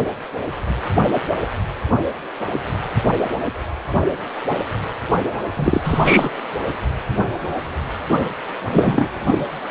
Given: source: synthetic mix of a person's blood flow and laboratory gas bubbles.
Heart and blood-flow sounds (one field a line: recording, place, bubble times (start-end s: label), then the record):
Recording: Doppler ultrasound of blood flow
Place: precordium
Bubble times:
5.55-6.29 s: bubbles
8.70-9.10 s: bubbles
9.27-9.39 s: bubbles
From the record:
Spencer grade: 2 (many but less than half of the cardiac periods contain bubble signals, singularly or in groups)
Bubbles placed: anywhere in the cardiac cycle